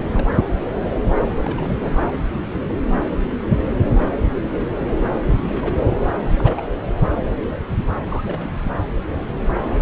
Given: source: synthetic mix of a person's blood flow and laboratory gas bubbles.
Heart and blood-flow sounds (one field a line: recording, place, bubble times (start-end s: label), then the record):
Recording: Doppler ultrasound of blood flow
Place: subclavian vein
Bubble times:
0.00-0.07 s: bubbles
0.12-0.28 s: bubbles
1.32-2.17 s: bubbles
5.42-5.75 s: bubbles
5.89-5.98 s: bubbles
6.14-6.18 s: bubbles
6.37-6.61 s: bubbles
8.09-8.22 s: bubbles
8.27-8.72 s: bubbles
9.80-9.82 s: bubbles
From the record:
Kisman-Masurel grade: 221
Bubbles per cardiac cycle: several, 3 to 8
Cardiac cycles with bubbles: 10 to 50%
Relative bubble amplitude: barely perceptible (0.100 to 0.250)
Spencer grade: 2 (many but less than half of the cardiac periods contain bubble signals, singularly or in groups)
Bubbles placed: anywhere in the cardiac cycle